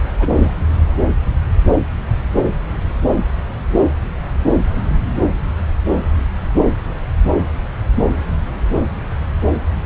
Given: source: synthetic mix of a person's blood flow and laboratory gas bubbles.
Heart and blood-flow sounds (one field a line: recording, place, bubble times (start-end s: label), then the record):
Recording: Doppler ultrasound of blood flow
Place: subclavian vein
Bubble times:
0.20-0.28 s: bubbles
0.36-0.52 s: bubbles
From the record:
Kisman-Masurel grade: 112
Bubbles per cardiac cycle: 1 to 2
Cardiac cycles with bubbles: 1 to 10%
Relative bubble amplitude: moderate (0.250 to 0.450)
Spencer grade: 1 (occasional bubble signal discernible with the cardiac motion signal, with majority of cardiac periods free of bubbles)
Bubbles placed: anywhere in the cardiac cycle